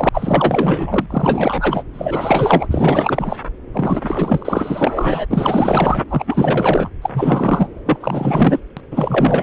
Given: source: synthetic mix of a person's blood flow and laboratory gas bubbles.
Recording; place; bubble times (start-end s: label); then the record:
Doppler ultrasound of blood flow; subclavian vein
0.00-0.09 s: bubbles
0.13-1.06 s: bubbles
1.10-1.84 s: bubbles
1.93-2.67 s: bubbles
2.71-3.37 s: bubbles
3.73-5.26 s: bubbles
5.29-6.03 s: bubbles
6.09-6.89 s: bubbles
7.02-7.10 s: bubbles
7.12-7.67 s: bubbles
7.86-7.97 s: bubbles
8.00-8.60 s: bubbles
8.76-8.80 s: bubbles
8.90-9.43 s: bubbles
From the record:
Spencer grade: 4 (maximum detectable bubble signal sounding continuously throughout systole and diastole of every cardiac period, and overriding the amplitude of the normal cardiac signals); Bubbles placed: anywhere in the cardiac cycle